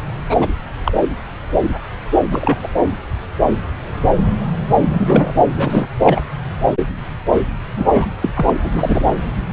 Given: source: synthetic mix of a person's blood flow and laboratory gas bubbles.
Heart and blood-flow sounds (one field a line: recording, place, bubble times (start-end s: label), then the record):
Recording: Doppler ultrasound of blood flow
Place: subclavian vein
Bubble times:
0.29-0.36 s: bubbles
0.40-0.48 s: bubbles
0.85-0.93 s: bubbles
2.30-2.67 s: bubbles
4.89-5.33 s: bubbles
5.55-5.87 s: bubbles
6.00-6.22 s: bubbles
7.76-7.86 s: bubbles
7.94-8.07 s: bubbles
8.21-8.30 s: bubbles
8.36-8.54 s: bubbles
8.62-9.06 s: bubbles
From the record:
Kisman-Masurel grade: 223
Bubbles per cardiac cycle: several, 3 to 8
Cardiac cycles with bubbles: 10 to 50%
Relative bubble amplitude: loud (0.450 to 0.775)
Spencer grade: 2 (many but less than half of the cardiac periods contain bubble signals, singularly or in groups)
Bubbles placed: anywhere in the cardiac cycle